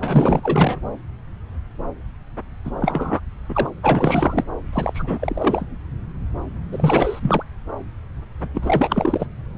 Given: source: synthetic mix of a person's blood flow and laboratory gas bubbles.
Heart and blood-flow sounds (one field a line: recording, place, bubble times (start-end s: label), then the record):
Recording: Doppler ultrasound of blood flow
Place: subclavian vein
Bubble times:
0.00-0.80 s: bubbles
2.65-2.71 s: bubbles
2.80-3.20 s: bubbles
3.49-3.70 s: bubbles
3.83-4.44 s: bubbles
4.72-5.66 s: bubbles
6.72-7.43 s: bubbles
8.54-9.27 s: bubbles
From the record:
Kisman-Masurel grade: 332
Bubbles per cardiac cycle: rolling drumbeat, 9 or more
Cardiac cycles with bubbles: 50 to 99%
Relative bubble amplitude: moderate (0.250 to 0.450)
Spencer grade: 3 (all of the cardiac periods contain showers or single bubble signals, but not dominating or overriding the cardiac motion signals)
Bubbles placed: anywhere in the cardiac cycle